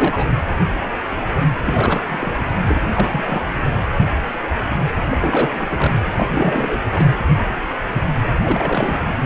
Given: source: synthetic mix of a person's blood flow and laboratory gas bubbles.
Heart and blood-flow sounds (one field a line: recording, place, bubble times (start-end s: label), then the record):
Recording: Doppler ultrasound of blood flow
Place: precordium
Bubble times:
0.00-0.27 s: bubbles
1.65-2.33 s: bubbles
2.65-2.90 s: bubbles
2.92-3.42 s: bubbles
5.10-5.95 s: bubbles
6.16-6.81 s: bubbles
6.90-7.05 s: bubbles
8.43-9.18 s: bubbles
From the record:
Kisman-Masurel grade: 332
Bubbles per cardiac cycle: rolling drumbeat, 9 or more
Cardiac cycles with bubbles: 50 to 99%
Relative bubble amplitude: moderate (0.250 to 0.450)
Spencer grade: 3 (all of the cardiac periods contain showers or single bubble signals, but not dominating or overriding the cardiac motion signals)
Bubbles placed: anywhere in the cardiac cycle